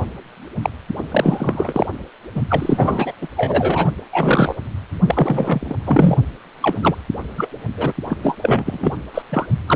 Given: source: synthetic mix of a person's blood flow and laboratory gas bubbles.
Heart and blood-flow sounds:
Doppler ultrasound of blood flow; precordium
0.62-0.70 s: bubbles
0.98-1.03 s: bubbles
1.11-1.86 s: bubbles
2.35-2.42 s: bubbles
2.49-3.12 s: bubbles
3.21-3.27 s: bubbles
3.37-3.90 s: bubbles
3.98-4.00 s: bubbles
4.12-4.56 s: bubbles
5.04-5.75 s: bubbles
5.85-6.17 s: bubbles
6.61-7.03 s: bubbles
7.37-7.48 s: bubbles
7.76-7.93 s: bubbles
8.10-8.17 s: bubbles
8.23-8.38 s: bubbles
8.41-8.92 s: bubbles
9.14-9.22 s: bubbles
9.29-9.46 s: bubbles
9.67-9.76 s: bubbles
From the record:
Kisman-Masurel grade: 343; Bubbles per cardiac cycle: rolling drumbeat, 9 or more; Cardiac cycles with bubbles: 100%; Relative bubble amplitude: loud (0.450 to 0.775); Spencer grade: 3 (all of the cardiac periods contain showers or single bubble signals, but not dominating or overriding the cardiac motion signals); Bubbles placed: anywhere in the cardiac cycle

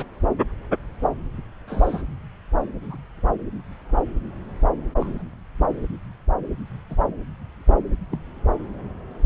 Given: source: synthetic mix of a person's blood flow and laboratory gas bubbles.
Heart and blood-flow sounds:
Doppler ultrasound of blood flow; subclavian vein
0.00-0.06 s: bubbles
1.67-2.02 s: bubbles
2.83-2.97 s: bubbles
5.00-5.23 s: bubbles
5.58-5.67 s: bubbles
6.90-6.96 s: bubbles
8.11-8.20 s: bubbles
From the record:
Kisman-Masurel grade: 121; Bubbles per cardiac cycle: 1 to 2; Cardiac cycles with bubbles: 10 to 50%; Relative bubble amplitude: barely perceptible (0.100 to 0.250); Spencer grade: 2 (many but less than half of the cardiac periods contain bubble signals, singularly or in groups); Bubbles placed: anywhere in the cardiac cycle

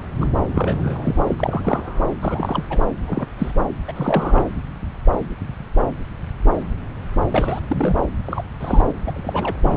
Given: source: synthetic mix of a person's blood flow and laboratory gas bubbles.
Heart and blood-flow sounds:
Doppler ultrasound of blood flow; subclavian vein
0.20-0.29 s: bubbles
0.55-1.21 s: bubbles
1.27-2.01 s: bubbles
2.21-2.64 s: bubbles
2.69-2.82 s: bubbles
3.08-3.26 s: bubbles
3.39-3.51 s: bubbles
3.88-3.92 s: bubbles
3.96-4.45 s: bubbles
7.31-7.59 s: bubbles
7.68-8.02 s: bubbles
8.26-8.41 s: bubbles
8.60-8.82 s: bubbles
8.88-8.92 s: bubbles
9.05-9.56 s: bubbles
9.62-9.77 s: bubbles
From the record:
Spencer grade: 3 (all of the cardiac periods contain showers or single bubble signals, but not dominating or overriding the cardiac motion signals); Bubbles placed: anywhere in the cardiac cycle

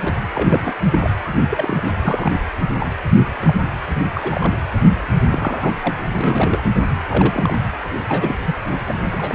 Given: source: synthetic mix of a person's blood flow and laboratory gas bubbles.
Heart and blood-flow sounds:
Doppler ultrasound of blood flow; precordium
0.00-0.14 s: bubbles
0.35-0.73 s: bubbles
0.92-1.10 s: bubbles
1.50-1.92 s: bubbles
2.02-2.33 s: bubbles
2.59-2.67 s: bubbles
2.80-2.87 s: bubbles
3.42-3.54 s: bubbles
3.98-4.07 s: bubbles
4.15-4.53 s: bubbles
5.29-5.74 s: bubbles
5.81-5.90 s: bubbles
6.07-6.63 s: bubbles
7.08-7.58 s: bubbles
8.09-8.36 s: bubbles
8.45-8.54 s: bubbles
8.87-9.01 s: bubbles
9.11-9.35 s: bubbles
From the record:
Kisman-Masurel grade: 242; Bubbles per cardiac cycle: several, 3 to 8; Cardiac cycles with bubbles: 100%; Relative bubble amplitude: moderate (0.250 to 0.450); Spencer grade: 3 (all of the cardiac periods contain showers or single bubble signals, but not dominating or overriding the cardiac motion signals); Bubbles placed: anywhere in the cardiac cycle

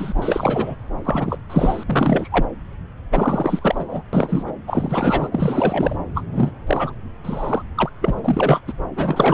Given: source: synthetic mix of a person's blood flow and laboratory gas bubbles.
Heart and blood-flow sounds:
Doppler ultrasound of blood flow; subclavian vein
0.00-0.12 s: bubbles
0.17-0.75 s: bubbles
1.04-1.39 s: bubbles
1.50-1.84 s: bubbles
1.86-2.28 s: bubbles
2.31-2.45 s: bubbles
3.11-4.02 s: bubbles
4.13-4.52 s: bubbles
4.67-5.29 s: bubbles
5.31-5.96 s: bubbles
6.14-6.24 s: bubbles
6.31-6.51 s: bubbles
6.67-6.94 s: bubbles
7.23-7.62 s: bubbles
7.75-7.90 s: bubbles
8.01-8.14 s: bubbles
8.17-8.20 s: bubbles
8.23-8.61 s: bubbles
8.67-8.73 s: bubbles
8.96-9.34 s: bubbles
From the record:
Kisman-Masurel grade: 343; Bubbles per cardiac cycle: rolling drumbeat, 9 or more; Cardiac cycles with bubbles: 100%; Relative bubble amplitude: loud (0.450 to 0.775); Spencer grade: 3 (all of the cardiac periods contain showers or single bubble signals, but not dominating or overriding the cardiac motion signals); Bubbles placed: anywhere in the cardiac cycle

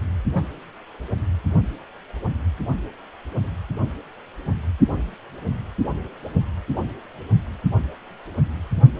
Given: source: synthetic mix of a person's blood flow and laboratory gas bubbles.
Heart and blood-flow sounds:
Doppler ultrasound of blood flow; precordium
0.33-0.46 s: bubbles
4.92-4.96 s: bubbles
From the record:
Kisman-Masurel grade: 121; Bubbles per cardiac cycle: 1 to 2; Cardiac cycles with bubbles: 10 to 50%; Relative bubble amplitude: barely perceptible (0.100 to 0.250); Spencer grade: 2 (many but less than half of the cardiac periods contain bubble signals, singularly or in groups); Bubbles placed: only in the low amplitude regions of the cardiac cycle

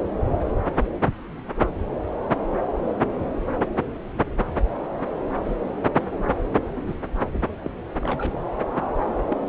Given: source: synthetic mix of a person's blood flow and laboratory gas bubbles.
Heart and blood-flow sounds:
Doppler ultrasound of blood flow; subclavian vein
5.45-5.57 s: bubbles
6.87-6.94 s: bubbles
7.61-7.69 s: bubbles
8.00-8.39 s: bubbles
9.30-9.49 s: bubbles
From the record:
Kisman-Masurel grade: 121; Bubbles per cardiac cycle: 1 to 2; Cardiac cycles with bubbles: 10 to 50%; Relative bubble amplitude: barely perceptible (0.100 to 0.250); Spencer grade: 2 (many but less than half of the cardiac periods contain bubble signals, singularly or in groups); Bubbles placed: anywhere in the cardiac cycle

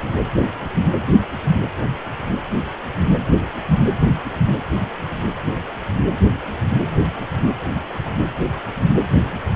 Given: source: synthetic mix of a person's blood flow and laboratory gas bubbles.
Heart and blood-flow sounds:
Doppler ultrasound of blood flow; precordium
no bubbles
From the record:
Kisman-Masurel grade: 000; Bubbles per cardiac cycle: 0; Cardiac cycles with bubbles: 0%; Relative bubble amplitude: no bubbles discernible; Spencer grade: 0 (complete lack of bubble signals)

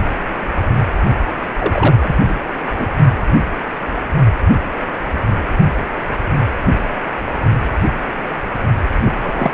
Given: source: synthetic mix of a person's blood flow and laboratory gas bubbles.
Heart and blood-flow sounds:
Doppler ultrasound of blood flow; precordium
1.59-1.95 s: bubbles
2.01-2.15 s: bubbles
2.28-2.34 s: bubbles
2.72-2.86 s: bubbles
9.04-9.13 s: bubbles
9.22-9.51 s: bubbles
From the record:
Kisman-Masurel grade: 222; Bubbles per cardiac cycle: several, 3 to 8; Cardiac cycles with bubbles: 10 to 50%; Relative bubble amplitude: moderate (0.250 to 0.450); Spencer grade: 2 (many but less than half of the cardiac periods contain bubble signals, singularly or in groups); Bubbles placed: only in the low amplitude regions of the cardiac cycle

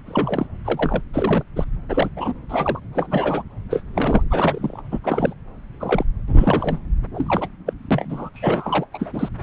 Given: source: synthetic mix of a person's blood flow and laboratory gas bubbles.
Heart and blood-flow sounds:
Doppler ultrasound of blood flow; subclavian vein
0.05-0.46 s: bubbles
0.65-1.02 s: bubbles
1.13-1.43 s: bubbles
1.56-1.65 s: bubbles
1.90-2.10 s: bubbles
2.15-2.33 s: bubbles
2.49-2.80 s: bubbles
2.93-3.44 s: bubbles
3.70-3.81 s: bubbles
3.94-4.24 s: bubbles
4.31-4.81 s: bubbles
4.91-4.99 s: bubbles
5.04-5.33 s: bubbles
5.79-6.04 s: bubbles
6.28-6.78 s: bubbles
7.14-7.49 s: bubbles
7.66-7.73 s: bubbles
7.91-8.29 s: bubbles
8.34-8.85 s: bubbles
8.93-9.29 s: bubbles
From the record:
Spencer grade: 3 (all of the cardiac periods contain showers or single bubble signals, but not dominating or overriding the cardiac motion signals); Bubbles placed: anywhere in the cardiac cycle

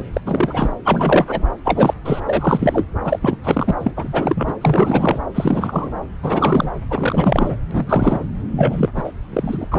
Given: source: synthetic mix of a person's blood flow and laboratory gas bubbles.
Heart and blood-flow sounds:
Doppler ultrasound of blood flow; subclavian vein
0.00-0.05 s: bubbles
0.13-0.21 s: bubbles
0.26-0.71 s: bubbles
0.85-1.47 s: bubbles
1.64-1.94 s: bubbles
2.04-2.21 s: bubbles
2.25-2.86 s: bubbles
3.03-3.19 s: bubbles
3.21-3.37 s: bubbles
3.42-3.75 s: bubbles
3.79-3.91 s: bubbles
3.96-4.54 s: bubbles
4.61-5.20 s: bubbles
5.34-5.92 s: bubbles
6.22-6.70 s: bubbles
6.90-7.56 s: bubbles
7.71-8.25 s: bubbles
8.56-8.89 s: bubbles
8.96-9.12 s: bubbles
9.33-9.67 s: bubbles
9.72-9.79 s: bubbles
From the record:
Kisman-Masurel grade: 343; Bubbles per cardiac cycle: rolling drumbeat, 9 or more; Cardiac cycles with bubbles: 100%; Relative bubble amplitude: loud (0.450 to 0.775); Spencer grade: 3 (all of the cardiac periods contain showers or single bubble signals, but not dominating or overriding the cardiac motion signals); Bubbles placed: anywhere in the cardiac cycle

